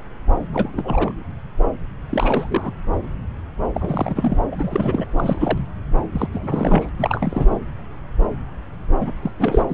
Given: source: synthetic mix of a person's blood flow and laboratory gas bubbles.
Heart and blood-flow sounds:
Doppler ultrasound of blood flow; subclavian vein
0.53-1.12 s: bubbles
2.10-2.71 s: bubbles
3.74-4.39 s: bubbles
4.51-5.05 s: bubbles
5.17-5.67 s: bubbles
6.12-6.28 s: bubbles
6.32-6.89 s: bubbles
6.99-7.55 s: bubbles
9.00-9.13 s: bubbles
9.21-9.31 s: bubbles
9.39-9.62 s: bubbles
9.68-9.74 s: bubbles
From the record:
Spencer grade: 3 (all of the cardiac periods contain showers or single bubble signals, but not dominating or overriding the cardiac motion signals); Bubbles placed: anywhere in the cardiac cycle

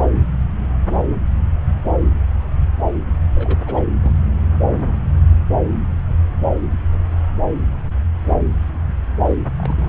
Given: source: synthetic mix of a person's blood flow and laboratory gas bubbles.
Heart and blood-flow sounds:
Doppler ultrasound of blood flow; subclavian vein
3.34-3.58 s: bubbles
3.65-3.80 s: bubbles
4.03-4.11 s: bubbles
9.24-9.36 s: bubbles
9.58-9.89 s: bubbles
From the record:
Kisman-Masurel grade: 221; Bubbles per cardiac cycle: several, 3 to 8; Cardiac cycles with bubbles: 10 to 50%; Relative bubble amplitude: barely perceptible (0.100 to 0.250); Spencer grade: 2 (many but less than half of the cardiac periods contain bubble signals, singularly or in groups); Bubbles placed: anywhere in the cardiac cycle

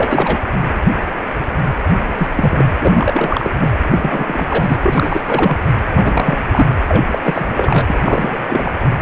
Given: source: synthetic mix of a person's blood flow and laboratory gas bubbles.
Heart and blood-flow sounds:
Doppler ultrasound of blood flow; precordium
0.00-0.38 s: bubbles
2.17-2.27 s: bubbles
2.35-2.64 s: bubbles
2.79-3.50 s: bubbles
3.60-3.70 s: bubbles
3.90-4.45 s: bubbles
4.48-4.75 s: bubbles
4.83-5.21 s: bubbles
5.24-5.65 s: bubbles
5.93-6.43 s: bubbles
6.53-6.68 s: bubbles
6.88-7.05 s: bubbles
7.12-7.19 s: bubbles
7.23-7.99 s: bubbles
8.04-8.46 s: bubbles
8.49-8.71 s: bubbles
From the record:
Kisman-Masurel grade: 332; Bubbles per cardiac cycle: rolling drumbeat, 9 or more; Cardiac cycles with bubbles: 50 to 99%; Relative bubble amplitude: moderate (0.250 to 0.450); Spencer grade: 3 (all of the cardiac periods contain showers or single bubble signals, but not dominating or overriding the cardiac motion signals); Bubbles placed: anywhere in the cardiac cycle

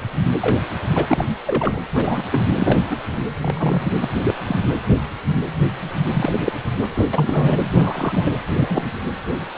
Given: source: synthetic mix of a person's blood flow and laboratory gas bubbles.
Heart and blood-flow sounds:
Doppler ultrasound of blood flow; precordium
0.40-0.59 s: bubbles
0.92-1.25 s: bubbles
1.46-1.79 s: bubbles
1.94-2.23 s: bubbles
2.32-2.79 s: bubbles
2.90-2.97 s: bubbles
3.41-3.91 s: bubbles
4.01-4.08 s: bubbles
4.24-4.34 s: bubbles
4.46-4.59 s: bubbles
6.14-6.53 s: bubbles
6.81-6.88 s: bubbles
6.95-7.08 s: bubbles
7.13-7.57 s: bubbles
7.74-8.23 s: bubbles
8.26-8.30 s: bubbles
8.49-8.88 s: bubbles
From the record:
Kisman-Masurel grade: 232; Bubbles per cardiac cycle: several, 3 to 8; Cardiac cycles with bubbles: 50 to 99%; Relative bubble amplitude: moderate (0.250 to 0.450); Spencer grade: 3 (all of the cardiac periods contain showers or single bubble signals, but not dominating or overriding the cardiac motion signals); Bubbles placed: anywhere in the cardiac cycle

